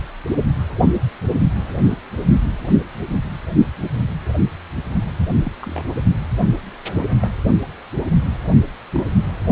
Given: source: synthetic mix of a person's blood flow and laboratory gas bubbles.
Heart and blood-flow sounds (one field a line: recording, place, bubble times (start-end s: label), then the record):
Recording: Doppler ultrasound of blood flow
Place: precordium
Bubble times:
5.44-5.52 s: bubbles
5.62-5.85 s: bubbles
6.93-7.06 s: bubbles
7.22-7.28 s: bubbles
8.94-9.04 s: bubbles
From the record:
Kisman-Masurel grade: 121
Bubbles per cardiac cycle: 1 to 2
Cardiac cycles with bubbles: 10 to 50%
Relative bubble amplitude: barely perceptible (0.100 to 0.250)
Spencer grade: 2 (many but less than half of the cardiac periods contain bubble signals, singularly or in groups)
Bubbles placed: only in the low amplitude regions of the cardiac cycle